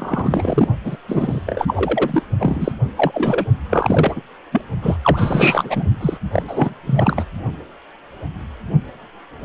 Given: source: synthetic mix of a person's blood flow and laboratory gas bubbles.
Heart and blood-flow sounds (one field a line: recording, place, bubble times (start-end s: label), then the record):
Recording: Doppler ultrasound of blood flow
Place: precordium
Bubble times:
0.00-0.68 s: bubbles
0.84-0.97 s: bubbles
1.07-2.22 s: bubbles
2.38-2.72 s: bubbles
2.95-3.48 s: bubbles
3.69-4.21 s: bubbles
4.52-4.62 s: bubbles
4.82-4.96 s: bubbles
5.02-5.85 s: bubbles
6.00-6.17 s: bubbles
6.33-6.42 s: bubbles
6.47-6.74 s: bubbles
6.86-7.24 s: bubbles
From the record:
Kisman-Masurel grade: 333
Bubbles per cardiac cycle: rolling drumbeat, 9 or more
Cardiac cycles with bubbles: 50 to 99%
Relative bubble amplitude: loud (0.450 to 0.775)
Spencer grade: 3 (all of the cardiac periods contain showers or single bubble signals, but not dominating or overriding the cardiac motion signals)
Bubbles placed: only in the low amplitude regions of the cardiac cycle